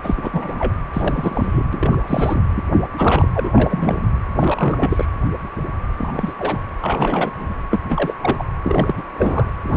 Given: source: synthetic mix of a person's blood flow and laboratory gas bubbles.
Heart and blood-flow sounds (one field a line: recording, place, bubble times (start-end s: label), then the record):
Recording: Doppler ultrasound of blood flow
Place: precordium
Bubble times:
0.03-0.74 s: bubbles
0.93-1.64 s: bubbles
1.73-1.97 s: bubbles
2.03-2.40 s: bubbles
2.55-2.65 s: bubbles
2.97-3.27 s: bubbles
3.34-4.07 s: bubbles
4.39-5.06 s: bubbles
5.98-6.33 s: bubbles
6.39-6.61 s: bubbles
6.82-7.58 s: bubbles
7.71-7.79 s: bubbles
7.89-8.14 s: bubbles
8.21-8.44 s: bubbles
8.63-9.03 s: bubbles
9.10-9.53 s: bubbles
9.63-9.77 s: bubbles
From the record:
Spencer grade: 3 (all of the cardiac periods contain showers or single bubble signals, but not dominating or overriding the cardiac motion signals)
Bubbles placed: anywhere in the cardiac cycle